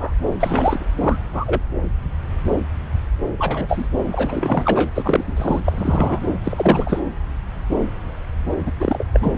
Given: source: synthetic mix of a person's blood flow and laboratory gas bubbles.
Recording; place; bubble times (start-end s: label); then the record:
Doppler ultrasound of blood flow; subclavian vein
0.00-0.16 s: bubbles
0.40-0.85 s: bubbles
0.98-1.17 s: bubbles
1.32-1.61 s: bubbles
3.38-3.88 s: bubbles
4.11-4.90 s: bubbles
4.94-5.60 s: bubbles
5.64-6.19 s: bubbles
6.43-7.02 s: bubbles
8.65-8.72 s: bubbles
8.79-9.07 s: bubbles
9.12-9.32 s: bubbles
From the record:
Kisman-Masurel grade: 233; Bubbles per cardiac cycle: several, 3 to 8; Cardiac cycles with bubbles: 50 to 99%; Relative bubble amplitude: loud (0.450 to 0.775); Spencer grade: 3 (all of the cardiac periods contain showers or single bubble signals, but not dominating or overriding the cardiac motion signals); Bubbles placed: anywhere in the cardiac cycle